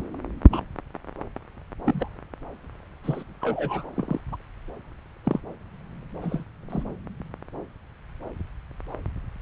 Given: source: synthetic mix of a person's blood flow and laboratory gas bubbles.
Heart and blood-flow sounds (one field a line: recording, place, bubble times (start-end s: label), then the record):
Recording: Doppler ultrasound of blood flow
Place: subclavian vein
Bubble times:
0.50-0.62 s: bubbles
1.85-2.08 s: bubbles
3.04-3.23 s: bubbles
3.41-3.90 s: bubbles
3.95-4.19 s: bubbles
4.32-4.36 s: bubbles
5.23-5.40 s: bubbles
6.21-6.43 s: bubbles
6.70-6.83 s: bubbles
From the record:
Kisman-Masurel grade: 121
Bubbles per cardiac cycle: 1 to 2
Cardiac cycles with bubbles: 10 to 50%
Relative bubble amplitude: barely perceptible (0.100 to 0.250)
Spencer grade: 2 (many but less than half of the cardiac periods contain bubble signals, singularly or in groups)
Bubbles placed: anywhere in the cardiac cycle